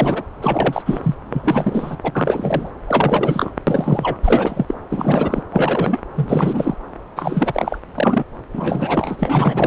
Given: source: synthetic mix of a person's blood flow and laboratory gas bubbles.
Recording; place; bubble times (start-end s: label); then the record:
Doppler ultrasound of blood flow; subclavian vein
0.00-0.23 s: bubbles
0.42-0.82 s: bubbles
0.85-1.15 s: bubbles
1.30-1.97 s: bubbles
2.03-2.12 s: bubbles
2.15-2.71 s: bubbles
2.87-3.52 s: bubbles
3.67-4.17 s: bubbles
4.22-4.65 s: bubbles
4.68-4.74 s: bubbles
4.89-5.43 s: bubbles
5.50-6.00 s: bubbles
6.15-6.75 s: bubbles
7.16-7.78 s: bubbles
7.95-8.24 s: bubbles
8.53-9.67 s: bubbles
From the record:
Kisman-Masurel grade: 333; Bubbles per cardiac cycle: rolling drumbeat, 9 or more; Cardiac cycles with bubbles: 50 to 99%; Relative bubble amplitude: loud (0.450 to 0.775); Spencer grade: 3 (all of the cardiac periods contain showers or single bubble signals, but not dominating or overriding the cardiac motion signals); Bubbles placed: anywhere in the cardiac cycle